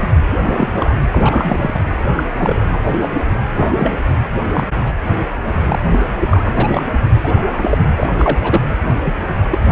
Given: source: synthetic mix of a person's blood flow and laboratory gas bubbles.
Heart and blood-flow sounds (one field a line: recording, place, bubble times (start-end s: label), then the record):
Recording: Doppler ultrasound of blood flow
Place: precordium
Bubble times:
0.00-0.10 s: bubbles
0.42-0.69 s: bubbles
0.73-0.93 s: bubbles
1.10-1.83 s: bubbles
2.15-2.23 s: bubbles
2.38-2.78 s: bubbles
2.88-3.18 s: bubbles
3.31-3.41 s: bubbles
3.56-4.00 s: bubbles
4.43-4.65 s: bubbles
4.77-4.93 s: bubbles
5.46-5.51 s: bubbles
5.62-5.79 s: bubbles
5.91-6.02 s: bubbles
6.30-6.82 s: bubbles
7.14-7.18 s: bubbles
7.23-7.78 s: bubbles
7.97-8.62 s: bubbles
9.05-9.14 s: bubbles
9.50-9.59 s: bubbles
From the record:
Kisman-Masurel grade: 242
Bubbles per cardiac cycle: several, 3 to 8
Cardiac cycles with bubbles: 100%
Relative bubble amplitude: moderate (0.250 to 0.450)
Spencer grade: 3 (all of the cardiac periods contain showers or single bubble signals, but not dominating or overriding the cardiac motion signals)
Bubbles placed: anywhere in the cardiac cycle